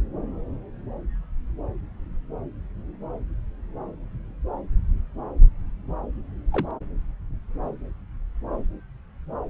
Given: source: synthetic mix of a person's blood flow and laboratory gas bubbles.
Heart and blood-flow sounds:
Doppler ultrasound of blood flow; subclavian vein
6.51-6.71 s: bubbles
From the record:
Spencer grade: 1 (occasional bubble signal discernible with the cardiac motion signal, with majority of cardiac periods free of bubbles); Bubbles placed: anywhere in the cardiac cycle

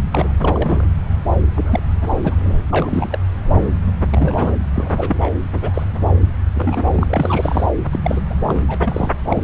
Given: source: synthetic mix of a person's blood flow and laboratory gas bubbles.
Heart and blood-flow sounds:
Doppler ultrasound of blood flow; subclavian vein
0.00-0.03 s: bubbles
0.10-0.28 s: bubbles
0.42-0.87 s: bubbles
1.55-1.80 s: bubbles
2.01-2.64 s: bubbles
2.69-3.19 s: bubbles
4.11-4.57 s: bubbles
4.76-5.29 s: bubbles
5.53-5.83 s: bubbles
6.54-7.66 s: bubbles
7.91-8.21 s: bubbles
8.29-8.34 s: bubbles
8.42-8.62 s: bubbles
8.67-9.12 s: bubbles
9.29-9.44 s: bubbles
From the record:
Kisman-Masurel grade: 232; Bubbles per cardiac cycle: several, 3 to 8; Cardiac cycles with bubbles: 50 to 99%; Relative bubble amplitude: moderate (0.250 to 0.450); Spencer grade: 3 (all of the cardiac periods contain showers or single bubble signals, but not dominating or overriding the cardiac motion signals); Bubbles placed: anywhere in the cardiac cycle

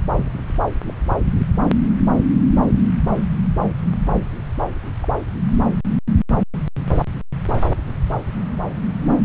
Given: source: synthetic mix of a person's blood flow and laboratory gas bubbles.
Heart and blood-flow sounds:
Doppler ultrasound of blood flow; subclavian vein
0.87-0.94 s: bubbles
5.02-5.08 s: bubbles
From the record:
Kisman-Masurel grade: 121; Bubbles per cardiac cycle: 1 to 2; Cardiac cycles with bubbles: 10 to 50%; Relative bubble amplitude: barely perceptible (0.100 to 0.250); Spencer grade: 2 (many but less than half of the cardiac periods contain bubble signals, singularly or in groups); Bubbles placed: anywhere in the cardiac cycle

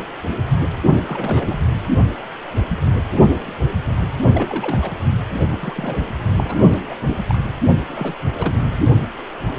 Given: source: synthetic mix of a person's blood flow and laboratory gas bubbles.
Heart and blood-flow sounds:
Doppler ultrasound of blood flow; precordium
1.06-1.60 s: bubbles
4.33-4.92 s: bubbles
5.61-6.03 s: bubbles
6.36-6.55 s: bubbles
6.71-6.80 s: bubbles
6.84-6.97 s: bubbles
7.07-7.22 s: bubbles
7.28-7.38 s: bubbles
7.44-7.48 s: bubbles
7.87-8.14 s: bubbles
8.33-8.78 s: bubbles
From the record:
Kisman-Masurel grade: 221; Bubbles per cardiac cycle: several, 3 to 8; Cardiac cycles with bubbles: 10 to 50%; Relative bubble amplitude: barely perceptible (0.100 to 0.250); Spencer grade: 2 (many but less than half of the cardiac periods contain bubble signals, singularly or in groups); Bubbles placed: only in the low amplitude regions of the cardiac cycle

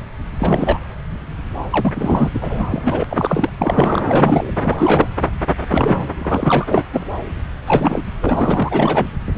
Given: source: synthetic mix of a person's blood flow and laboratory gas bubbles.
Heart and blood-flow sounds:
Doppler ultrasound of blood flow; subclavian vein
0.40-0.78 s: bubbles
1.71-1.93 s: bubbles
1.96-2.29 s: bubbles
2.41-2.67 s: bubbles
2.70-3.04 s: bubbles
3.09-3.49 s: bubbles
3.57-4.02 s: bubbles
4.09-4.51 s: bubbles
4.62-5.07 s: bubbles
5.68-6.07 s: bubbles
6.19-6.84 s: bubbles
6.93-7.04 s: bubbles
7.66-8.05 s: bubbles
8.20-9.11 s: bubbles
From the record:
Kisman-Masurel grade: 332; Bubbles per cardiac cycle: rolling drumbeat, 9 or more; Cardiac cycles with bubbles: 50 to 99%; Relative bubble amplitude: moderate (0.250 to 0.450); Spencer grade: 3 (all of the cardiac periods contain showers or single bubble signals, but not dominating or overriding the cardiac motion signals); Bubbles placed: anywhere in the cardiac cycle

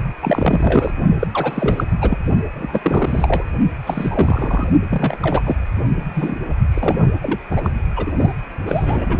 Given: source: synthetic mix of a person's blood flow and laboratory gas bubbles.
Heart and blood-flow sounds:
Doppler ultrasound of blood flow; precordium
0.22-0.94 s: bubbles
1.19-1.28 s: bubbles
1.33-1.84 s: bubbles
2.01-2.17 s: bubbles
2.54-2.79 s: bubbles
2.83-3.44 s: bubbles
3.85-4.67 s: bubbles
4.89-5.17 s: bubbles
5.22-5.42 s: bubbles
5.44-5.55 s: bubbles
6.14-6.35 s: bubbles
6.68-7.10 s: bubbles
7.21-7.39 s: bubbles
7.50-7.70 s: bubbles
7.96-8.12 s: bubbles
8.17-8.32 s: bubbles
8.66-9.20 s: bubbles
From the record:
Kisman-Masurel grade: 342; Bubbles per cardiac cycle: rolling drumbeat, 9 or more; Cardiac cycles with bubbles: 100%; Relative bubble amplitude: moderate (0.250 to 0.450); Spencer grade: 3 (all of the cardiac periods contain showers or single bubble signals, but not dominating or overriding the cardiac motion signals); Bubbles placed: only in the low amplitude regions of the cardiac cycle

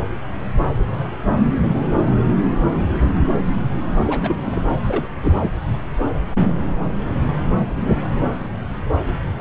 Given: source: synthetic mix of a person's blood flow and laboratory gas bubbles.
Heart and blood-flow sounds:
Doppler ultrasound of blood flow; subclavian vein
4.06-4.35 s: bubbles
4.45-4.62 s: bubbles
4.83-5.08 s: bubbles
5.22-5.50 s: bubbles
From the record:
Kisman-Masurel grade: 221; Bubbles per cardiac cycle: several, 3 to 8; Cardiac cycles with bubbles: 10 to 50%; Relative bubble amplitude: barely perceptible (0.100 to 0.250); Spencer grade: 2 (many but less than half of the cardiac periods contain bubble signals, singularly or in groups); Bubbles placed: anywhere in the cardiac cycle

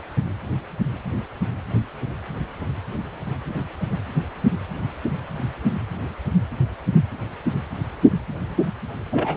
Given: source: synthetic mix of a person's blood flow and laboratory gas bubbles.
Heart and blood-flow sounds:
Doppler ultrasound of blood flow; precordium
9.11-9.37 s: bubbles
From the record:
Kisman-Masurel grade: 112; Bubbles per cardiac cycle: 1 to 2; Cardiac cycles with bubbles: 1 to 10%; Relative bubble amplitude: moderate (0.250 to 0.450); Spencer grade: 1 (occasional bubble signal discernible with the cardiac motion signal, with majority of cardiac periods free of bubbles); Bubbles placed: anywhere in the cardiac cycle

